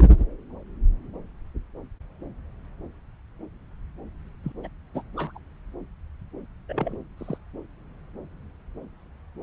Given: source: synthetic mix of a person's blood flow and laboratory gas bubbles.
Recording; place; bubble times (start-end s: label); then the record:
Doppler ultrasound of blood flow; subclavian vein
0.00-0.05 s: bubbles
0.16-0.24 s: bubbles
4.44-4.52 s: bubbles
4.63-4.67 s: bubbles
4.94-5.03 s: bubbles
5.16-5.32 s: bubbles
5.34-5.38 s: bubbles
6.69-6.97 s: bubbles
7.18-7.38 s: bubbles
From the record:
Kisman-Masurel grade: 221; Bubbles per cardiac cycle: several, 3 to 8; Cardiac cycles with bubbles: 10 to 50%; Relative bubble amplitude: barely perceptible (0.100 to 0.250); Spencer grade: 2 (many but less than half of the cardiac periods contain bubble signals, singularly or in groups); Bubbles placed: anywhere in the cardiac cycle